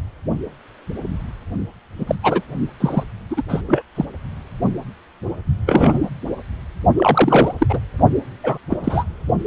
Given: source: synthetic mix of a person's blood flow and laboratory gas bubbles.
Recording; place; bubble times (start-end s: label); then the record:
Doppler ultrasound of blood flow; precordium
1.98-2.15 s: bubbles
2.23-2.42 s: bubbles
2.80-3.03 s: bubbles
3.30-3.43 s: bubbles
3.48-3.61 s: bubbles
3.66-3.82 s: bubbles
3.95-4.06 s: bubbles
5.66-6.10 s: bubbles
6.97-7.54 s: bubbles
7.58-7.67 s: bubbles
7.69-7.79 s: bubbles
8.43-8.58 s: bubbles
8.70-8.76 s: bubbles
8.83-9.04 s: bubbles
From the record:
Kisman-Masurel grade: 233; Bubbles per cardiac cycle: several, 3 to 8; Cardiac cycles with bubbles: 50 to 99%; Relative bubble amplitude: loud (0.450 to 0.775); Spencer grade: 3 (all of the cardiac periods contain showers or single bubble signals, but not dominating or overriding the cardiac motion signals); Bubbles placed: only in the low amplitude regions of the cardiac cycle